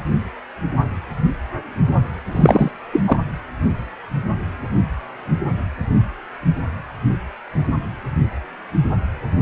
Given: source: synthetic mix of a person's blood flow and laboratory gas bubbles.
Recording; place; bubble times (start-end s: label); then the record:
Doppler ultrasound of blood flow; precordium
2.32-2.71 s: bubbles
2.92-3.04 s: bubbles
3.07-3.17 s: bubbles
From the record:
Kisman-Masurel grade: 213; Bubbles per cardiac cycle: several, 3 to 8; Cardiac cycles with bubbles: 1 to 10%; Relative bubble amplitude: loud (0.450 to 0.775); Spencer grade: 1 (occasional bubble signal discernible with the cardiac motion signal, with majority of cardiac periods free of bubbles); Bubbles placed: anywhere in the cardiac cycle